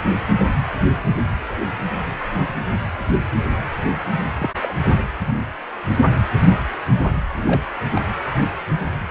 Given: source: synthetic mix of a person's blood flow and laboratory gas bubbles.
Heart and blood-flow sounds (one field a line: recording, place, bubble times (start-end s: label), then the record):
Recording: Doppler ultrasound of blood flow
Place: precordium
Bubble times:
4.40-4.51 s: bubbles
4.61-4.75 s: bubbles
7.46-7.63 s: bubbles
7.95-8.01 s: bubbles
From the record:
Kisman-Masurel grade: 121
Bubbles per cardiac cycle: 1 to 2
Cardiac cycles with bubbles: 10 to 50%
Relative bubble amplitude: barely perceptible (0.100 to 0.250)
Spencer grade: 2 (many but less than half of the cardiac periods contain bubble signals, singularly or in groups)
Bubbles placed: anywhere in the cardiac cycle